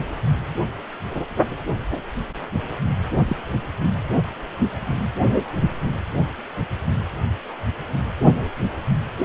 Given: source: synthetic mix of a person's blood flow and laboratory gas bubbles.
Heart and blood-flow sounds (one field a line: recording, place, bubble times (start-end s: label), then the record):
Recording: Doppler ultrasound of blood flow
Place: precordium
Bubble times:
3.27-3.36 s: bubbles
From the record:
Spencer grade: 1 (occasional bubble signal discernible with the cardiac motion signal, with majority of cardiac periods free of bubbles)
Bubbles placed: anywhere in the cardiac cycle